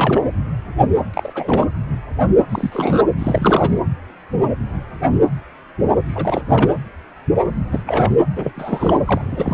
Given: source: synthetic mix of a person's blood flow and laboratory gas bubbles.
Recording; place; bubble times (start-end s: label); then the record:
Doppler ultrasound of blood flow; precordium
0.00-0.22 s: bubbles
1.14-1.67 s: bubbles
2.48-3.04 s: bubbles
3.19-3.80 s: bubbles
6.08-6.42 s: bubbles
6.48-6.69 s: bubbles
7.71-7.82 s: bubbles
7.86-8.14 s: bubbles
8.36-9.00 s: bubbles
9.05-9.54 s: bubbles
From the record:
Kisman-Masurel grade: 332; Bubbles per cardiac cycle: rolling drumbeat, 9 or more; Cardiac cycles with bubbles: 50 to 99%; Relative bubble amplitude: moderate (0.250 to 0.450); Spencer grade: 3 (all of the cardiac periods contain showers or single bubble signals, but not dominating or overriding the cardiac motion signals); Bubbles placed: anywhere in the cardiac cycle